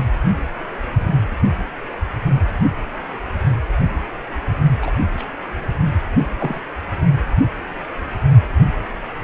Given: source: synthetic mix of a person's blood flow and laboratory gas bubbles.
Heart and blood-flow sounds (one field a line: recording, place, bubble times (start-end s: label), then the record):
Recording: Doppler ultrasound of blood flow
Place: precordium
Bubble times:
4.82-4.91 s: bubbles
5.17-5.25 s: bubbles
6.39-6.60 s: bubbles
From the record:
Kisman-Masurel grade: 122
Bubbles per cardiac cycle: 1 to 2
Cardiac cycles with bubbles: 10 to 50%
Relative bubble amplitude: moderate (0.250 to 0.450)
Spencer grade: 2 (many but less than half of the cardiac periods contain bubble signals, singularly or in groups)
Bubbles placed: only in the low amplitude regions of the cardiac cycle